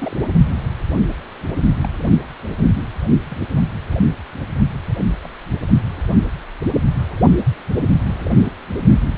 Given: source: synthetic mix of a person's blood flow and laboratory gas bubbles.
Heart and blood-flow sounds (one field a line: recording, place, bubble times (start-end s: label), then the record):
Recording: Doppler ultrasound of blood flow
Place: precordium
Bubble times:
0.00-0.20 s: bubbles
1.83-1.86 s: bubbles
3.29-3.36 s: bubbles
4.96-5.04 s: bubbles
5.22-5.30 s: bubbles
From the record:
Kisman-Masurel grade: 121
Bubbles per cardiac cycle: 1 to 2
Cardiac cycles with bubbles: 10 to 50%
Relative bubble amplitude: barely perceptible (0.100 to 0.250)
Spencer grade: 2 (many but less than half of the cardiac periods contain bubble signals, singularly or in groups)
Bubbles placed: anywhere in the cardiac cycle